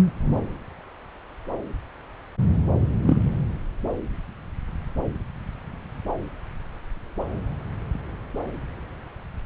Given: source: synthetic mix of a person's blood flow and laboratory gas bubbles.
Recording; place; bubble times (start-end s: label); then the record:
Doppler ultrasound of blood flow; subclavian vein
3.02-3.17 s: bubbles
From the record:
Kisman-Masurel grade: 112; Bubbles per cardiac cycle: 1 to 2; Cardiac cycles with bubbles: 1 to 10%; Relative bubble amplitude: moderate (0.250 to 0.450); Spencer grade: 1 (occasional bubble signal discernible with the cardiac motion signal, with majority of cardiac periods free of bubbles); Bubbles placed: anywhere in the cardiac cycle